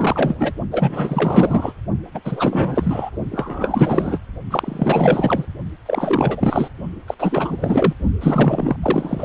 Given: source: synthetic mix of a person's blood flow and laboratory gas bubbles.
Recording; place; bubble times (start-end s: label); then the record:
Doppler ultrasound of blood flow; precordium
0.00-0.53 s: bubbles
0.71-1.73 s: bubbles
2.14-2.21 s: bubbles
2.24-3.10 s: bubbles
3.31-4.18 s: bubbles
4.51-5.45 s: bubbles
5.86-6.69 s: bubbles
7.07-7.15 s: bubbles
7.20-7.94 s: bubbles
8.21-8.77 s: bubbles
8.82-9.25 s: bubbles
From the record:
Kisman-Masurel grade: 444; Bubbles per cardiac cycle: continuous sound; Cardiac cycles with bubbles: 100%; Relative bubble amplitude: maximal (0.775 to 0.999); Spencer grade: 4 (maximum detectable bubble signal sounding continuously throughout systole and diastole of every cardiac period, and overriding the amplitude of the normal cardiac signals); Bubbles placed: only in the low amplitude regions of the cardiac cycle